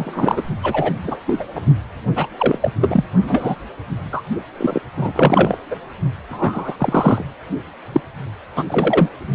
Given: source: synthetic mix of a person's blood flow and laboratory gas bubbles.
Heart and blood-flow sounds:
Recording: Doppler ultrasound of blood flow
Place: precordium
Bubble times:
0.00-0.42 s: bubbles
0.62-0.93 s: bubbles
1.04-1.17 s: bubbles
1.26-1.46 s: bubbles
1.54-1.60 s: bubbles
2.15-2.27 s: bubbles
2.38-2.71 s: bubbles
2.81-3.04 s: bubbles
3.26-3.55 s: bubbles
4.12-4.22 s: bubbles
4.58-4.80 s: bubbles
4.96-5.56 s: bubbles
5.71-5.76 s: bubbles
6.29-7.24 s: bubbles
7.92-8.01 s: bubbles
8.56-8.64 s: bubbles
8.67-9.10 s: bubbles
From the record:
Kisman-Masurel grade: 243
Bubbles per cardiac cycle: several, 3 to 8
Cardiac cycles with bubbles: 100%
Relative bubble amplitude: loud (0.450 to 0.775)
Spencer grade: 3 (all of the cardiac periods contain showers or single bubble signals, but not dominating or overriding the cardiac motion signals)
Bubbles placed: only in the low amplitude regions of the cardiac cycle

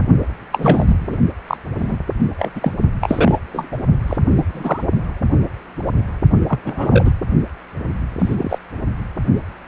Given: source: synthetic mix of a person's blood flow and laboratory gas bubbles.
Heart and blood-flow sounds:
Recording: Doppler ultrasound of blood flow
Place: precordium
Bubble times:
0.52-0.97 s: bubbles
1.00-1.18 s: bubbles
1.47-1.57 s: bubbles
1.77-1.98 s: bubbles
2.38-2.52 s: bubbles
2.55-2.73 s: bubbles
3.00-3.39 s: bubbles
3.52-3.69 s: bubbles
3.71-3.76 s: bubbles
4.06-4.16 s: bubbles
4.35-4.45 s: bubbles
4.47-4.83 s: bubbles
6.48-6.59 s: bubbles
6.64-7.11 s: bubbles
8.19-8.58 s: bubbles
From the record:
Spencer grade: 3 (all of the cardiac periods contain showers or single bubble signals, but not dominating or overriding the cardiac motion signals)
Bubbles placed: only in the low amplitude regions of the cardiac cycle

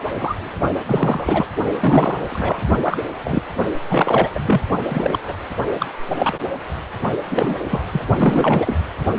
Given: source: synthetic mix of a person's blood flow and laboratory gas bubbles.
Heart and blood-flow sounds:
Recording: Doppler ultrasound of blood flow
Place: precordium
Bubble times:
0.18-0.35 s: bubbles
0.86-1.46 s: bubbles
1.80-2.62 s: bubbles
2.83-2.99 s: bubbles
3.24-3.43 s: bubbles
3.90-4.30 s: bubbles
4.34-4.40 s: bubbles
4.45-4.61 s: bubbles
4.88-5.19 s: bubbles
5.28-5.33 s: bubbles
5.79-5.86 s: bubbles
6.19-6.40 s: bubbles
7.30-7.55 s: bubbles
7.68-7.82 s: bubbles
7.92-8.05 s: bubbles
8.16-8.79 s: bubbles
From the record:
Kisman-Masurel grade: 243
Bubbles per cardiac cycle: several, 3 to 8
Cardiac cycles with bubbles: 100%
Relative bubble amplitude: loud (0.450 to 0.775)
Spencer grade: 3 (all of the cardiac periods contain showers or single bubble signals, but not dominating or overriding the cardiac motion signals)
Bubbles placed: only in the low amplitude regions of the cardiac cycle

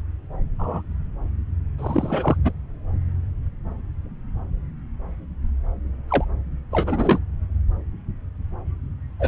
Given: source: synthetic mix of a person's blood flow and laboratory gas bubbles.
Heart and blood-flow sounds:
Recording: Doppler ultrasound of blood flow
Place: subclavian vein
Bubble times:
0.58-0.82 s: bubbles
1.78-2.37 s: bubbles
2.44-2.51 s: bubbles
6.08-6.25 s: bubbles
6.71-7.19 s: bubbles
9.20-9.28 s: bubbles
From the record:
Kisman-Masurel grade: 232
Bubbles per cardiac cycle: several, 3 to 8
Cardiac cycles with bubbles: 50 to 99%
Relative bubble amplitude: moderate (0.250 to 0.450)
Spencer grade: 3 (all of the cardiac periods contain showers or single bubble signals, but not dominating or overriding the cardiac motion signals)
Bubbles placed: anywhere in the cardiac cycle

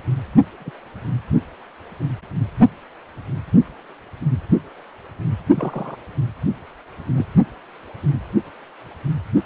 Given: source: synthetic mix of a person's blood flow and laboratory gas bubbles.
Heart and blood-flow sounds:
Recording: Doppler ultrasound of blood flow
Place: precordium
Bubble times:
0.59-0.70 s: bubbles
5.55-5.97 s: bubbles
7.16-7.26 s: bubbles
From the record:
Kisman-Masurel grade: 121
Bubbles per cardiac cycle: 1 to 2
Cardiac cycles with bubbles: 10 to 50%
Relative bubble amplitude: barely perceptible (0.100 to 0.250)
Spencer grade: 2 (many but less than half of the cardiac periods contain bubble signals, singularly or in groups)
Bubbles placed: only in the low amplitude regions of the cardiac cycle

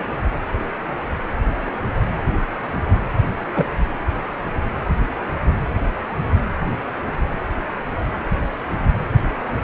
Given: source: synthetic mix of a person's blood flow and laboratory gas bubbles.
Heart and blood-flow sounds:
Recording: Doppler ultrasound of blood flow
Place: precordium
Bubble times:
3.55-3.65 s: bubbles
From the record:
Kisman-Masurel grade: 113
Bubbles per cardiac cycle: 1 to 2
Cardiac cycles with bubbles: 1 to 10%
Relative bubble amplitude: loud (0.450 to 0.775)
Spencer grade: 1 (occasional bubble signal discernible with the cardiac motion signal, with majority of cardiac periods free of bubbles)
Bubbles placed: anywhere in the cardiac cycle

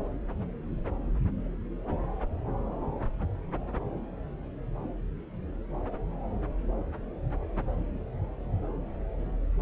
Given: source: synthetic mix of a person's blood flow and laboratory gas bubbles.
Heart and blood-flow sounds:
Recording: Doppler ultrasound of blood flow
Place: subclavian vein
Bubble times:
no bubbles
From the record:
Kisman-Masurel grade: 000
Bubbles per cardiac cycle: 0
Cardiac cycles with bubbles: 0%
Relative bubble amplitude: no bubbles discernible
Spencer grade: 0 (complete lack of bubble signals)

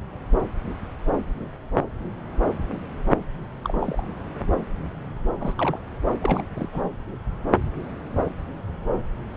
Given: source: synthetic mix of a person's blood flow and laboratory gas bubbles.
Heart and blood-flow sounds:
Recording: Doppler ultrasound of blood flow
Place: subclavian vein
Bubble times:
3.64-4.07 s: bubbles
5.40-5.78 s: bubbles
6.21-6.43 s: bubbles
6.55-6.68 s: bubbles
6.72-6.82 s: bubbles
From the record:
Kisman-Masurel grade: 221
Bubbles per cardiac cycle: several, 3 to 8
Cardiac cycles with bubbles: 10 to 50%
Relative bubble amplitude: barely perceptible (0.100 to 0.250)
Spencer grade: 2 (many but less than half of the cardiac periods contain bubble signals, singularly or in groups)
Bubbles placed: anywhere in the cardiac cycle

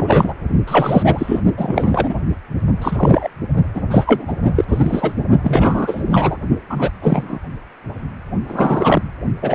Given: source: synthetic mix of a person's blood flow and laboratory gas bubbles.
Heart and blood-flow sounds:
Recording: Doppler ultrasound of blood flow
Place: precordium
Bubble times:
0.00-0.34 s: bubbles
0.67-1.41 s: bubbles
1.57-2.14 s: bubbles
2.82-3.29 s: bubbles
3.74-3.81 s: bubbles
3.90-4.33 s: bubbles
4.55-4.64 s: bubbles
4.67-5.13 s: bubbles
5.43-6.04 s: bubbles
6.11-6.38 s: bubbles
6.69-6.90 s: bubbles
7.01-7.39 s: bubbles
8.49-9.02 s: bubbles
9.42-9.54 s: bubbles
From the record:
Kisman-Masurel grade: 233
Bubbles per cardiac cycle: several, 3 to 8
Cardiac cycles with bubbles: 50 to 99%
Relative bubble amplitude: loud (0.450 to 0.775)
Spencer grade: 3 (all of the cardiac periods contain showers or single bubble signals, but not dominating or overriding the cardiac motion signals)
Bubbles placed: only in the low amplitude regions of the cardiac cycle

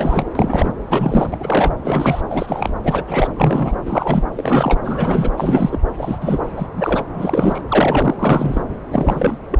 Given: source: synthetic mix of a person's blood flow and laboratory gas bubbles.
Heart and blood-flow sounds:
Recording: Doppler ultrasound of blood flow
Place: subclavian vein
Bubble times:
0.00-0.24 s: bubbles
0.35-0.71 s: bubbles
0.89-1.37 s: bubbles
1.40-1.72 s: bubbles
1.82-2.21 s: bubbles
2.30-2.73 s: bubbles
2.83-3.04 s: bubbles
3.07-3.28 s: bubbles
3.36-3.76 s: bubbles
3.85-4.23 s: bubbles
4.35-4.80 s: bubbles
4.83-5.32 s: bubbles
5.37-5.79 s: bubbles
5.98-6.18 s: bubbles
6.21-6.42 s: bubbles
6.56-6.67 s: bubbles
6.75-7.04 s: bubbles
7.14-7.62 s: bubbles
7.68-8.15 s: bubbles
8.19-8.64 s: bubbles
8.91-9.38 s: bubbles
9.51-9.59 s: bubbles
From the record:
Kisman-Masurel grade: 343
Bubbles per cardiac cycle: rolling drumbeat, 9 or more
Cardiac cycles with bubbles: 100%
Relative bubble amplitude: loud (0.450 to 0.775)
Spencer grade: 3 (all of the cardiac periods contain showers or single bubble signals, but not dominating or overriding the cardiac motion signals)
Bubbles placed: anywhere in the cardiac cycle

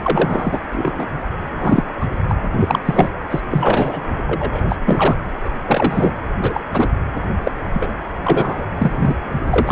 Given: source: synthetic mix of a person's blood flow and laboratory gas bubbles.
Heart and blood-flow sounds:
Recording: Doppler ultrasound of blood flow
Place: precordium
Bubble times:
0.03-0.59 s: bubbles
0.73-1.05 s: bubbles
1.56-1.83 s: bubbles
2.00-2.06 s: bubbles
2.28-2.35 s: bubbles
2.60-2.80 s: bubbles
2.85-3.10 s: bubbles
3.29-3.40 s: bubbles
3.50-4.03 s: bubbles
4.27-4.62 s: bubbles
4.68-4.78 s: bubbles
4.86-5.16 s: bubbles
5.44-5.49 s: bubbles
5.67-6.14 s: bubbles
6.43-6.61 s: bubbles
6.73-6.89 s: bubbles
7.43-7.51 s: bubbles
7.74-7.94 s: bubbles
8.23-8.65 s: bubbles
8.77-9.15 s: bubbles
9.49-9.72 s: bubbles
From the record:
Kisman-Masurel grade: 233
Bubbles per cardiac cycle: several, 3 to 8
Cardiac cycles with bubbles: 50 to 99%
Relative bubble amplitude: loud (0.450 to 0.775)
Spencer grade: 3 (all of the cardiac periods contain showers or single bubble signals, but not dominating or overriding the cardiac motion signals)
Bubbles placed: anywhere in the cardiac cycle

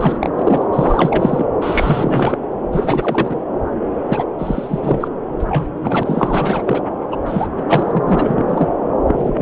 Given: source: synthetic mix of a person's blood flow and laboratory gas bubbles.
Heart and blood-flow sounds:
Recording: Doppler ultrasound of blood flow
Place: subclavian vein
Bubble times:
0.00-0.31 s: bubbles
0.33-0.65 s: bubbles
0.72-1.45 s: bubbles
1.61-2.37 s: bubbles
2.72-3.43 s: bubbles
4.07-4.24 s: bubbles
4.39-5.08 s: bubbles
5.40-5.73 s: bubbles
5.82-6.83 s: bubbles
7.12-7.17 s: bubbles
7.25-7.48 s: bubbles
7.56-7.66 s: bubbles
7.69-8.04 s: bubbles
8.06-8.45 s: bubbles
8.47-8.70 s: bubbles
9.07-9.42 s: bubbles
From the record:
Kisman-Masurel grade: 343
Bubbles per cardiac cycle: rolling drumbeat, 9 or more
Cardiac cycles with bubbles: 100%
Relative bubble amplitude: loud (0.450 to 0.775)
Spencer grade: 3 (all of the cardiac periods contain showers or single bubble signals, but not dominating or overriding the cardiac motion signals)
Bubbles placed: anywhere in the cardiac cycle

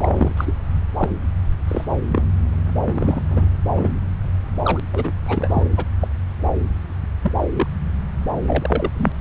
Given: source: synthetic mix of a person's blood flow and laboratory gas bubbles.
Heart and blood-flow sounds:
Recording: Doppler ultrasound of blood flow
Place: subclavian vein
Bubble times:
0.00-0.32 s: bubbles
0.36-0.53 s: bubbles
0.97-1.09 s: bubbles
1.67-1.85 s: bubbles
2.08-2.23 s: bubbles
2.87-3.23 s: bubbles
3.29-3.48 s: bubbles
3.75-3.89 s: bubbles
4.63-4.80 s: bubbles
4.93-5.12 s: bubbles
5.28-5.63 s: bubbles
5.77-5.86 s: bubbles
6.01-6.08 s: bubbles
7.23-7.32 s: bubbles
7.40-7.68 s: bubbles
8.47-8.90 s: bubbles
8.96-9.12 s: bubbles
From the record:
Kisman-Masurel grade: 242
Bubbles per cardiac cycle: several, 3 to 8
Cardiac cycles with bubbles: 100%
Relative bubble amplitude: moderate (0.250 to 0.450)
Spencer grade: 3 (all of the cardiac periods contain showers or single bubble signals, but not dominating or overriding the cardiac motion signals)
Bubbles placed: anywhere in the cardiac cycle

